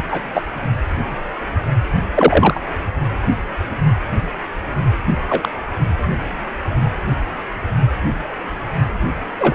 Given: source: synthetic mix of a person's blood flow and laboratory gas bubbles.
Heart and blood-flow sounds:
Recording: Doppler ultrasound of blood flow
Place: precordium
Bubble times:
0.10-0.21 s: bubbles
0.33-0.42 s: bubbles
2.14-2.61 s: bubbles
5.29-5.49 s: bubbles
9.38-9.55 s: bubbles
From the record:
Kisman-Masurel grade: 123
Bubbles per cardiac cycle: 1 to 2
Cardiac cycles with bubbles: 10 to 50%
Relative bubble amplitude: loud (0.450 to 0.775)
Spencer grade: 2 (many but less than half of the cardiac periods contain bubble signals, singularly or in groups)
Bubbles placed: only in the low amplitude regions of the cardiac cycle

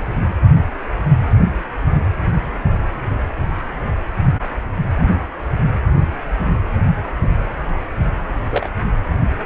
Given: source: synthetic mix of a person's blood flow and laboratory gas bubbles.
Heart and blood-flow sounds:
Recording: Doppler ultrasound of blood flow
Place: precordium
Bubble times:
8.50-8.70 s: bubbles
From the record:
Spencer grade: 1 (occasional bubble signal discernible with the cardiac motion signal, with majority of cardiac periods free of bubbles)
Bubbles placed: anywhere in the cardiac cycle

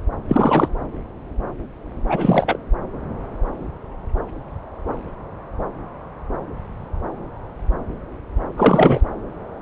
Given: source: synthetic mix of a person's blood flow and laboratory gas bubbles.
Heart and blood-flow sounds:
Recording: Doppler ultrasound of blood flow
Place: subclavian vein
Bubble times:
0.28-0.68 s: bubbles
2.09-2.57 s: bubbles
8.56-9.00 s: bubbles
From the record:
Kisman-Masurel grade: 223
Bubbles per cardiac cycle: several, 3 to 8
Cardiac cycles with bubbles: 10 to 50%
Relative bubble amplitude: loud (0.450 to 0.775)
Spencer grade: 2 (many but less than half of the cardiac periods contain bubble signals, singularly or in groups)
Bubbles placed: anywhere in the cardiac cycle

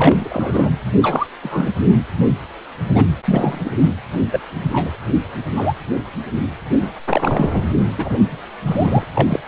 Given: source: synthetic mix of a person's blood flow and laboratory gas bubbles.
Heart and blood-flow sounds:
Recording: Doppler ultrasound of blood flow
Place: precordium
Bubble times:
0.00-0.70 s: bubbles
1.02-1.27 s: bubbles
1.42-1.72 s: bubbles
2.94-3.06 s: bubbles
3.25-3.71 s: bubbles
4.32-4.39 s: bubbles
4.71-4.98 s: bubbles
5.54-5.73 s: bubbles
6.81-6.91 s: bubbles
7.09-7.48 s: bubbles
7.97-8.18 s: bubbles
8.65-9.04 s: bubbles
9.14-9.39 s: bubbles
From the record:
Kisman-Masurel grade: 233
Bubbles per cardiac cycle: several, 3 to 8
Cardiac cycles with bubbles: 50 to 99%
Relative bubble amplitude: loud (0.450 to 0.775)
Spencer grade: 3 (all of the cardiac periods contain showers or single bubble signals, but not dominating or overriding the cardiac motion signals)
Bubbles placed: anywhere in the cardiac cycle

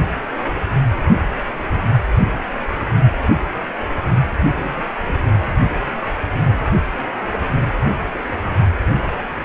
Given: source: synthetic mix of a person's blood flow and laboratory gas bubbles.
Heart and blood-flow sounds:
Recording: Doppler ultrasound of blood flow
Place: precordium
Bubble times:
4.54-4.82 s: bubbles
5.02-5.15 s: bubbles
From the record:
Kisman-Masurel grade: 111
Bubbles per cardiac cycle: 1 to 2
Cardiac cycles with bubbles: 1 to 10%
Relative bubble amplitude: barely perceptible (0.100 to 0.250)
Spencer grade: 1 (occasional bubble signal discernible with the cardiac motion signal, with majority of cardiac periods free of bubbles)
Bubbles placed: only in the low amplitude regions of the cardiac cycle

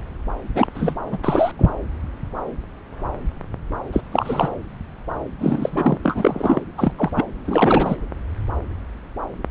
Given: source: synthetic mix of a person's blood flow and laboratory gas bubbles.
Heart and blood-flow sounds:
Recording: Doppler ultrasound of blood flow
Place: subclavian vein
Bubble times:
0.55-0.67 s: bubbles
0.75-0.94 s: bubbles
1.12-1.19 s: bubbles
1.23-1.52 s: bubbles
1.58-1.72 s: bubbles
3.93-4.00 s: bubbles
4.11-4.49 s: bubbles
5.39-5.98 s: bubbles
6.03-6.61 s: bubbles
6.77-6.92 s: bubbles
6.98-7.10 s: bubbles
7.15-7.25 s: bubbles
7.46-7.96 s: bubbles
From the record:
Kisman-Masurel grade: 222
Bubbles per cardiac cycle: several, 3 to 8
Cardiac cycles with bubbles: 10 to 50%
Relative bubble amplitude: moderate (0.250 to 0.450)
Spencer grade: 2 (many but less than half of the cardiac periods contain bubble signals, singularly or in groups)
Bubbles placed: anywhere in the cardiac cycle

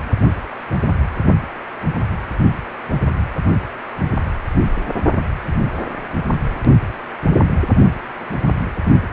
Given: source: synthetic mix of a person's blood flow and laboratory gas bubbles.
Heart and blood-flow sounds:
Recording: Doppler ultrasound of blood flow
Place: precordium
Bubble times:
2.95-2.99 s: bubbles
3.02-3.11 s: bubbles
7.32-7.38 s: bubbles
7.43-7.48 s: bubbles
8.15-8.39 s: bubbles
From the record:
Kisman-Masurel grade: 121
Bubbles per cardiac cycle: 1 to 2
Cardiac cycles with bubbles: 10 to 50%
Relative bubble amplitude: barely perceptible (0.100 to 0.250)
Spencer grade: 2 (many but less than half of the cardiac periods contain bubble signals, singularly or in groups)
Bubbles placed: only in the low amplitude regions of the cardiac cycle

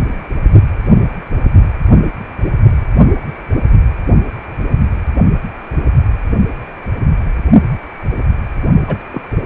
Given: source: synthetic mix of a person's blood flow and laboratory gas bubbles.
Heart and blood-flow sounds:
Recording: Doppler ultrasound of blood flow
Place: precordium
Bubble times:
8.87-8.97 s: bubbles
9.12-9.22 s: bubbles
From the record:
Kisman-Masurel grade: 212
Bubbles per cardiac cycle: several, 3 to 8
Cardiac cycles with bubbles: 1 to 10%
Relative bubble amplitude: moderate (0.250 to 0.450)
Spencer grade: 1 (occasional bubble signal discernible with the cardiac motion signal, with majority of cardiac periods free of bubbles)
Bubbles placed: only in the low amplitude regions of the cardiac cycle

